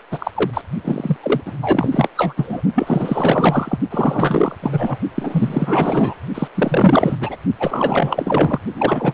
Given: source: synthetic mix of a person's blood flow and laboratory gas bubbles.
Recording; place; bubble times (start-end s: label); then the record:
Doppler ultrasound of blood flow; precordium
0.11-0.31 s: bubbles
0.35-0.51 s: bubbles
0.53-0.61 s: bubbles
0.84-1.17 s: bubbles
1.22-1.41 s: bubbles
1.46-1.53 s: bubbles
1.62-2.08 s: bubbles
2.17-2.33 s: bubbles
2.36-2.62 s: bubbles
2.74-3.79 s: bubbles
3.91-4.55 s: bubbles
4.61-4.97 s: bubbles
5.14-6.14 s: bubbles
6.34-6.47 s: bubbles
6.54-7.16 s: bubbles
7.21-7.37 s: bubbles
7.59-8.60 s: bubbles
8.74-9.14 s: bubbles
From the record:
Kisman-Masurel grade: 444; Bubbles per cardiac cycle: continuous sound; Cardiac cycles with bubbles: 100%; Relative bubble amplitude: maximal (0.775 to 0.999); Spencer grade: 4 (maximum detectable bubble signal sounding continuously throughout systole and diastole of every cardiac period, and overriding the amplitude of the normal cardiac signals); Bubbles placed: only in the low amplitude regions of the cardiac cycle